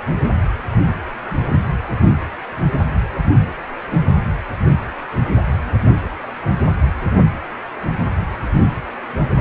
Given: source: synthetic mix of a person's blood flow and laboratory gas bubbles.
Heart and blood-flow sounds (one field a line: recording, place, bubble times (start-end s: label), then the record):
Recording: Doppler ultrasound of blood flow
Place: precordium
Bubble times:
no bubbles
From the record:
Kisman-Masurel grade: 000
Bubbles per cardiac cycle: 0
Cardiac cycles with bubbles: 0%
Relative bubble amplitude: no bubbles discernible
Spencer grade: 0 (complete lack of bubble signals)